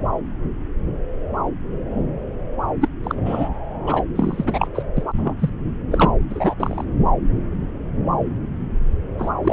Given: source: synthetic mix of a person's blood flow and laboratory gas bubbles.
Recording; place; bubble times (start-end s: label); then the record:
Doppler ultrasound of blood flow; subclavian vein
2.80-2.89 s: bubbles
3.03-3.15 s: bubbles
3.25-3.49 s: bubbles
3.86-4.04 s: bubbles
4.15-4.67 s: bubbles
4.74-4.82 s: bubbles
4.97-5.03 s: bubbles
5.18-5.34 s: bubbles
5.38-5.49 s: bubbles
5.92-6.09 s: bubbles
6.29-6.56 s: bubbles
6.58-6.84 s: bubbles
9.19-9.30 s: bubbles
9.44-9.53 s: bubbles
From the record:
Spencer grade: 3 (all of the cardiac periods contain showers or single bubble signals, but not dominating or overriding the cardiac motion signals); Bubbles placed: anywhere in the cardiac cycle